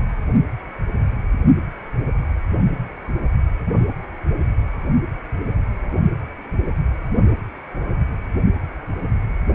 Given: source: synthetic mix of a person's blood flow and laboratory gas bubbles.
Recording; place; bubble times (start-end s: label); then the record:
Doppler ultrasound of blood flow; precordium
0.33-0.41 s: bubbles
From the record:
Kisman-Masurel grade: 111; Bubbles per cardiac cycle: 1 to 2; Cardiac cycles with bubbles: 1 to 10%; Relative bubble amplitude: barely perceptible (0.100 to 0.250); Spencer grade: 1 (occasional bubble signal discernible with the cardiac motion signal, with majority of cardiac periods free of bubbles); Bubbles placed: anywhere in the cardiac cycle